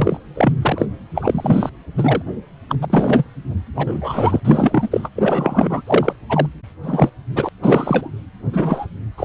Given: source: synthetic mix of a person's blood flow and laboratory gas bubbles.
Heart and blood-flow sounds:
Doppler ultrasound of blood flow; precordium
0.00-0.17 s: bubbles
0.35-0.52 s: bubbles
0.61-0.85 s: bubbles
1.15-1.70 s: bubbles
1.98-2.22 s: bubbles
2.69-2.75 s: bubbles
2.81-2.85 s: bubbles
2.90-3.23 s: bubbles
3.75-4.40 s: bubbles
4.45-5.09 s: bubbles
5.15-5.82 s: bubbles
5.87-6.12 s: bubbles
6.29-6.46 s: bubbles
6.83-7.09 s: bubbles
7.35-7.49 s: bubbles
7.62-8.11 s: bubbles
8.53-8.87 s: bubbles
9.17-9.25 s: bubbles
From the record:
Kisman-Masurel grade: 243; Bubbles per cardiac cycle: several, 3 to 8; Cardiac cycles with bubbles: 100%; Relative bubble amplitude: loud (0.450 to 0.775); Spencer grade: 3 (all of the cardiac periods contain showers or single bubble signals, but not dominating or overriding the cardiac motion signals); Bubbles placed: anywhere in the cardiac cycle

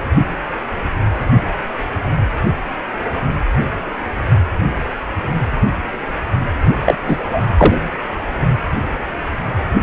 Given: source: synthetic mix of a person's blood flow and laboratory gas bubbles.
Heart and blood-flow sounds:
Doppler ultrasound of blood flow; precordium
6.86-6.96 s: bubbles
7.07-7.17 s: bubbles
7.25-7.42 s: bubbles
7.57-7.78 s: bubbles
From the record:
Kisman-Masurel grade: 213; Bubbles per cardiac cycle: several, 3 to 8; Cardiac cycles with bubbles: 1 to 10%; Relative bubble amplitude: loud (0.450 to 0.775); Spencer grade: 1 (occasional bubble signal discernible with the cardiac motion signal, with majority of cardiac periods free of bubbles); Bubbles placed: only in the low amplitude regions of the cardiac cycle

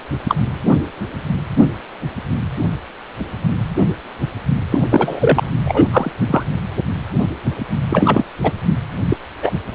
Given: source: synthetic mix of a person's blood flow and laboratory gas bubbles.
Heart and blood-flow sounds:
Doppler ultrasound of blood flow; precordium
0.28-0.35 s: bubbles
4.71-4.81 s: bubbles
4.91-5.49 s: bubbles
5.64-5.88 s: bubbles
5.92-6.11 s: bubbles
6.26-6.43 s: bubbles
7.90-8.26 s: bubbles
8.43-8.52 s: bubbles
9.09-9.17 s: bubbles
9.43-9.51 s: bubbles
From the record:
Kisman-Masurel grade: 223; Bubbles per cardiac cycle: several, 3 to 8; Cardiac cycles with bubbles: 10 to 50%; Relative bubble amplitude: loud (0.450 to 0.775); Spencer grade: 2 (many but less than half of the cardiac periods contain bubble signals, singularly or in groups); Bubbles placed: anywhere in the cardiac cycle

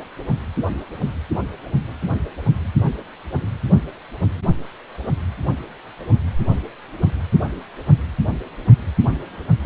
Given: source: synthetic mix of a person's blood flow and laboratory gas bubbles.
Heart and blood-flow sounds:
Doppler ultrasound of blood flow; precordium
no bubbles
From the record:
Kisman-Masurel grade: 000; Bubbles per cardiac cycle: 0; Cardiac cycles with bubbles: 0%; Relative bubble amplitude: no bubbles discernible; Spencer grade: 0 (complete lack of bubble signals)

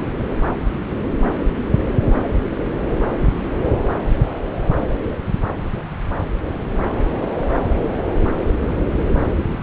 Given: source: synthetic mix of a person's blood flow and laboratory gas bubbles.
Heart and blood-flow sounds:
Doppler ultrasound of blood flow; subclavian vein
no bubbles
From the record:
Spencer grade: 0 (complete lack of bubble signals)

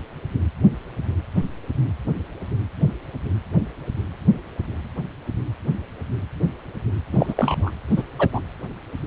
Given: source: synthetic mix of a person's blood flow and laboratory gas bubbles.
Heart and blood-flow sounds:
Doppler ultrasound of blood flow; precordium
7.12-7.71 s: bubbles
7.96-8.03 s: bubbles
8.19-8.29 s: bubbles
8.32-8.41 s: bubbles
From the record:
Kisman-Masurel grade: 213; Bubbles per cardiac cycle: several, 3 to 8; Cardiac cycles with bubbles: 1 to 10%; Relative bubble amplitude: loud (0.450 to 0.775); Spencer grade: 1 (occasional bubble signal discernible with the cardiac motion signal, with majority of cardiac periods free of bubbles); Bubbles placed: anywhere in the cardiac cycle

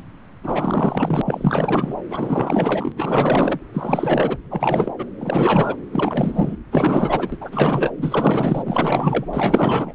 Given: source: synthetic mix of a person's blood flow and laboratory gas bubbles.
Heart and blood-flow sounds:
Doppler ultrasound of blood flow; subclavian vein
0.43-1.22 s: bubbles
1.24-1.96 s: bubbles
2.10-2.92 s: bubbles
2.96-3.59 s: bubbles
3.74-4.38 s: bubbles
4.50-4.93 s: bubbles
4.98-5.05 s: bubbles
5.19-5.76 s: bubbles
5.92-6.56 s: bubbles
6.71-7.29 s: bubbles
7.32-7.38 s: bubbles
7.40-7.90 s: bubbles
7.98-9.26 s: bubbles
9.33-9.94 s: bubbles
From the record:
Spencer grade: 4 (maximum detectable bubble signal sounding continuously throughout systole and diastole of every cardiac period, and overriding the amplitude of the normal cardiac signals); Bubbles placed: anywhere in the cardiac cycle

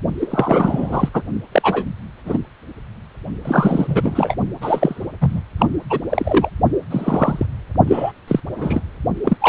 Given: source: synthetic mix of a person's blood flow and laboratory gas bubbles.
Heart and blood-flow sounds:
Doppler ultrasound of blood flow; precordium
0.20-1.09 s: bubbles
1.14-1.23 s: bubbles
1.52-1.85 s: bubbles
2.25-2.38 s: bubbles
3.44-4.36 s: bubbles
4.61-5.05 s: bubbles
5.21-5.41 s: bubbles
5.58-5.68 s: bubbles
5.89-6.00 s: bubbles
6.09-6.50 s: bubbles
6.91-7.46 s: bubbles
7.88-8.12 s: bubbles
8.28-8.40 s: bubbles
8.55-8.81 s: bubbles
9.23-9.37 s: bubbles
9.40-9.49 s: bubbles
From the record:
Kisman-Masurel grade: 243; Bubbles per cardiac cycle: several, 3 to 8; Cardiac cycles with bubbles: 100%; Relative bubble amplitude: loud (0.450 to 0.775); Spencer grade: 3 (all of the cardiac periods contain showers or single bubble signals, but not dominating or overriding the cardiac motion signals); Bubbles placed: only in the low amplitude regions of the cardiac cycle

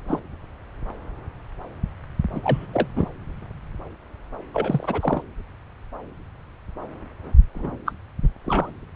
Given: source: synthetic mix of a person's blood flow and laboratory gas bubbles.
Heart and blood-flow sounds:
Doppler ultrasound of blood flow; subclavian vein
0.07-0.21 s: bubbles
2.33-2.40 s: bubbles
2.43-2.67 s: bubbles
2.73-2.88 s: bubbles
2.96-3.06 s: bubbles
4.54-5.22 s: bubbles
7.54-7.78 s: bubbles
7.86-7.92 s: bubbles
8.21-8.29 s: bubbles
8.44-8.71 s: bubbles
From the record:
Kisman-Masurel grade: 222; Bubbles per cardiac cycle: several, 3 to 8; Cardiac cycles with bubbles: 10 to 50%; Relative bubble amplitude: moderate (0.250 to 0.450); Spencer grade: 2 (many but less than half of the cardiac periods contain bubble signals, singularly or in groups); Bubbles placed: anywhere in the cardiac cycle

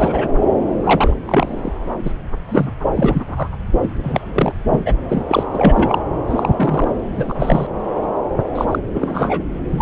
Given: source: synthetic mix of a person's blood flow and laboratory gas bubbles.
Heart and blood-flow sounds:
Doppler ultrasound of blood flow; subclavian vein
0.00-0.28 s: bubbles
0.83-1.14 s: bubbles
1.25-1.73 s: bubbles
2.04-2.13 s: bubbles
2.48-2.69 s: bubbles
2.95-3.23 s: bubbles
3.36-3.49 s: bubbles
3.82-3.89 s: bubbles
4.03-4.52 s: bubbles
4.71-4.94 s: bubbles
5.08-5.24 s: bubbles
5.28-5.43 s: bubbles
5.54-5.99 s: bubbles
6.29-6.50 s: bubbles
6.56-6.88 s: bubbles
7.12-7.67 s: bubbles
8.55-8.65 s: bubbles
8.71-8.79 s: bubbles
8.94-9.42 s: bubbles
9.71-9.82 s: bubbles
From the record:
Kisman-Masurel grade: 243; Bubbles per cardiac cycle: several, 3 to 8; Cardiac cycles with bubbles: 100%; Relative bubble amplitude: loud (0.450 to 0.775); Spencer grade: 3 (all of the cardiac periods contain showers or single bubble signals, but not dominating or overriding the cardiac motion signals); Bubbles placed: anywhere in the cardiac cycle

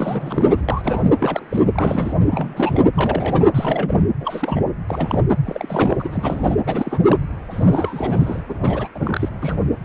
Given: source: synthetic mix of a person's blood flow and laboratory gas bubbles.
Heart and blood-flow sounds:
Doppler ultrasound of blood flow; precordium
0.00-0.61 s: bubbles
0.68-1.03 s: bubbles
1.19-1.45 s: bubbles
1.50-2.16 s: bubbles
2.30-2.83 s: bubbles
2.94-3.45 s: bubbles
3.54-4.01 s: bubbles
4.20-4.62 s: bubbles
4.88-5.23 s: bubbles
5.46-5.96 s: bubbles
5.99-6.57 s: bubbles
6.66-7.17 s: bubbles
7.50-8.43 s: bubbles
8.49-8.58 s: bubbles
8.61-8.88 s: bubbles
8.94-9.29 s: bubbles
9.42-9.60 s: bubbles
From the record:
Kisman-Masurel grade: 342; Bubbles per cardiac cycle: rolling drumbeat, 9 or more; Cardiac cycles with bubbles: 100%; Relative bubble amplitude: moderate (0.250 to 0.450); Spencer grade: 3 (all of the cardiac periods contain showers or single bubble signals, but not dominating or overriding the cardiac motion signals); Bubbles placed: anywhere in the cardiac cycle

